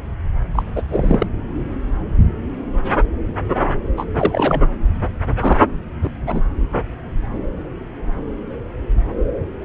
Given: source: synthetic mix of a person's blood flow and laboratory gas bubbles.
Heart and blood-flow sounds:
Doppler ultrasound of blood flow; subclavian vein
0.55-0.62 s: bubbles
0.76-0.82 s: bubbles
0.90-1.27 s: bubbles
3.97-4.05 s: bubbles
4.18-4.60 s: bubbles
5.40-5.57 s: bubbles
6.02-6.10 s: bubbles
6.26-6.42 s: bubbles
From the record:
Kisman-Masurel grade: 223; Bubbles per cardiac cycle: several, 3 to 8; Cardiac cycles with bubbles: 10 to 50%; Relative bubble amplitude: loud (0.450 to 0.775); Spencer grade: 2 (many but less than half of the cardiac periods contain bubble signals, singularly or in groups); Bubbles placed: anywhere in the cardiac cycle

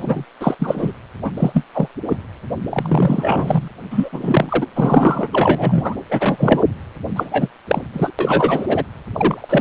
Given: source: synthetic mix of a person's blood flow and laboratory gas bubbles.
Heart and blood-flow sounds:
Doppler ultrasound of blood flow; precordium
0.00-0.24 s: bubbles
0.41-0.55 s: bubbles
0.59-0.93 s: bubbles
1.23-1.31 s: bubbles
1.36-1.64 s: bubbles
1.73-1.88 s: bubbles
2.09-2.16 s: bubbles
2.69-3.68 s: bubbles
3.90-4.09 s: bubbles
4.12-4.67 s: bubbles
4.75-5.28 s: bubbles
5.33-5.95 s: bubbles
6.09-6.63 s: bubbles
7.16-7.49 s: bubbles
7.67-7.81 s: bubbles
7.93-8.11 s: bubbles
8.19-8.85 s: bubbles
9.12-9.61 s: bubbles
From the record:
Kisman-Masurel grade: 243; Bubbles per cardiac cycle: several, 3 to 8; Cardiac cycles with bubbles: 100%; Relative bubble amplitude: loud (0.450 to 0.775); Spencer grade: 3 (all of the cardiac periods contain showers or single bubble signals, but not dominating or overriding the cardiac motion signals); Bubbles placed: anywhere in the cardiac cycle

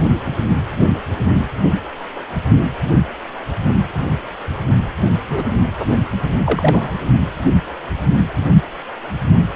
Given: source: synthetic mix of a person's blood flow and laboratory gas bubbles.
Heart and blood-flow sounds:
Doppler ultrasound of blood flow; precordium
5.29-5.43 s: bubbles
6.44-6.94 s: bubbles
From the record:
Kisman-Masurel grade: 213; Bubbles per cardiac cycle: several, 3 to 8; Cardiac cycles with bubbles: 1 to 10%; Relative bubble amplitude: loud (0.450 to 0.775); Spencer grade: 1 (occasional bubble signal discernible with the cardiac motion signal, with majority of cardiac periods free of bubbles); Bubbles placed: anywhere in the cardiac cycle

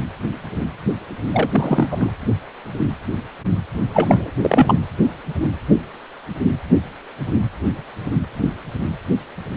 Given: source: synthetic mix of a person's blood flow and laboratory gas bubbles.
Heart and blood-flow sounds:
Doppler ultrasound of blood flow; precordium
1.32-1.50 s: bubbles
1.53-2.12 s: bubbles
3.94-4.30 s: bubbles
4.42-4.74 s: bubbles
From the record:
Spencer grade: 2 (many but less than half of the cardiac periods contain bubble signals, singularly or in groups); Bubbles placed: anywhere in the cardiac cycle

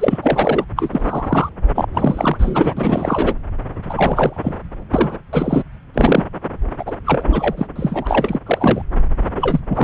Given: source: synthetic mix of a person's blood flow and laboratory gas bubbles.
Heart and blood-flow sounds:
Doppler ultrasound of blood flow; subclavian vein
0.00-0.19 s: bubbles
0.22-0.65 s: bubbles
0.76-1.50 s: bubbles
1.75-1.85 s: bubbles
1.94-2.73 s: bubbles
2.76-3.34 s: bubbles
3.89-4.39 s: bubbles
4.43-4.55 s: bubbles
4.93-5.19 s: bubbles
5.33-5.63 s: bubbles
5.94-6.23 s: bubbles
6.79-6.97 s: bubbles
7.04-7.67 s: bubbles
7.75-8.39 s: bubbles
8.46-8.82 s: bubbles
9.37-9.60 s: bubbles
9.69-9.84 s: bubbles
From the record:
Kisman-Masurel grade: 343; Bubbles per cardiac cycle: rolling drumbeat, 9 or more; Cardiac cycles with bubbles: 100%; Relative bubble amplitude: loud (0.450 to 0.775); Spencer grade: 3 (all of the cardiac periods contain showers or single bubble signals, but not dominating or overriding the cardiac motion signals); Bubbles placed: anywhere in the cardiac cycle

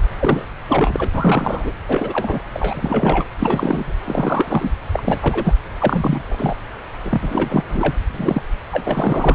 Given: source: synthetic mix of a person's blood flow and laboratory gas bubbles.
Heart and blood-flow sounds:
Doppler ultrasound of blood flow; subclavian vein
0.19-0.45 s: bubbles
0.68-1.73 s: bubbles
1.88-2.42 s: bubbles
2.54-3.25 s: bubbles
3.38-3.95 s: bubbles
4.05-4.72 s: bubbles
4.93-5.54 s: bubbles
5.79-6.22 s: bubbles
6.28-6.57 s: bubbles
7.03-7.64 s: bubbles
7.69-7.95 s: bubbles
8.14-8.42 s: bubbles
8.71-9.35 s: bubbles
From the record:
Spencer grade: 3 (all of the cardiac periods contain showers or single bubble signals, but not dominating or overriding the cardiac motion signals); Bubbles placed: anywhere in the cardiac cycle

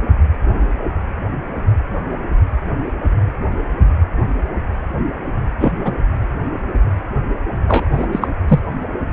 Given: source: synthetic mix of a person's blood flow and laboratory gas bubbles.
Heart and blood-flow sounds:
Doppler ultrasound of blood flow; precordium
5.59-5.96 s: bubbles
7.67-7.85 s: bubbles
7.92-8.07 s: bubbles
8.12-8.28 s: bubbles
8.48-8.60 s: bubbles
From the record:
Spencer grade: 2 (many but less than half of the cardiac periods contain bubble signals, singularly or in groups); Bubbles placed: anywhere in the cardiac cycle

